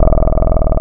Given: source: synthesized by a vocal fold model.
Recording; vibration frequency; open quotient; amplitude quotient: sustained vowel; 20 Hz; 0.5; 1.2